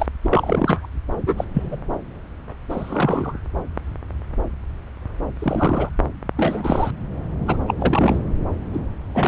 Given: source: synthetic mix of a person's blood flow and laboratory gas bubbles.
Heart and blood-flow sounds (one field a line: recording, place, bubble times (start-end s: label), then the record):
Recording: Doppler ultrasound of blood flow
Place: subclavian vein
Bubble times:
0.00-0.06 s: bubbles
0.23-0.88 s: bubbles
1.27-1.45 s: bubbles
1.54-1.78 s: bubbles
2.70-3.37 s: bubbles
5.39-5.90 s: bubbles
6.37-6.91 s: bubbles
7.46-7.57 s: bubbles
7.67-7.75 s: bubbles
7.79-8.21 s: bubbles
8.73-8.80 s: bubbles
9.12-9.27 s: bubbles
From the record:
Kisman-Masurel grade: 233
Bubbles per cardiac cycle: several, 3 to 8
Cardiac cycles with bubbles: 50 to 99%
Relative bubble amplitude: loud (0.450 to 0.775)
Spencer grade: 3 (all of the cardiac periods contain showers or single bubble signals, but not dominating or overriding the cardiac motion signals)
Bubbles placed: anywhere in the cardiac cycle